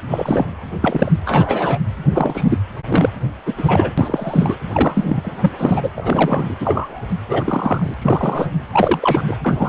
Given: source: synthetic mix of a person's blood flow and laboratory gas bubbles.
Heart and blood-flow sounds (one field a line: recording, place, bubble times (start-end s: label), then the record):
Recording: Doppler ultrasound of blood flow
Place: precordium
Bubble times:
0.11-0.48 s: bubbles
0.81-1.12 s: bubbles
1.26-1.79 s: bubbles
2.10-2.45 s: bubbles
2.48-2.58 s: bubbles
2.89-3.09 s: bubbles
3.46-3.54 s: bubbles
3.57-3.93 s: bubbles
3.97-4.55 s: bubbles
4.72-5.33 s: bubbles
5.41-5.51 s: bubbles
5.58-5.90 s: bubbles
5.96-6.55 s: bubbles
6.59-7.05 s: bubbles
7.29-7.94 s: bubbles
8.02-8.49 s: bubbles
8.71-9.23 s: bubbles
9.28-9.37 s: bubbles
9.45-9.69 s: bubbles
From the record:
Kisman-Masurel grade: 243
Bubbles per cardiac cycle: several, 3 to 8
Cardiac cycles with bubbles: 100%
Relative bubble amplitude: loud (0.450 to 0.775)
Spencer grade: 3 (all of the cardiac periods contain showers or single bubble signals, but not dominating or overriding the cardiac motion signals)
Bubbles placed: anywhere in the cardiac cycle